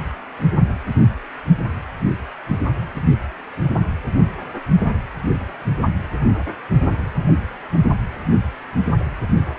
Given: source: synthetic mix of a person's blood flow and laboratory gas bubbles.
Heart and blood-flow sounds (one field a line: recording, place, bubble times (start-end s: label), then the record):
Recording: Doppler ultrasound of blood flow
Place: precordium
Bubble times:
9.54-9.59 s: bubbles
From the record:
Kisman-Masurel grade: 111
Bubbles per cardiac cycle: 1 to 2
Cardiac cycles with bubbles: 1 to 10%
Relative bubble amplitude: barely perceptible (0.100 to 0.250)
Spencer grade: 1 (occasional bubble signal discernible with the cardiac motion signal, with majority of cardiac periods free of bubbles)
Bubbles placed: only in the low amplitude regions of the cardiac cycle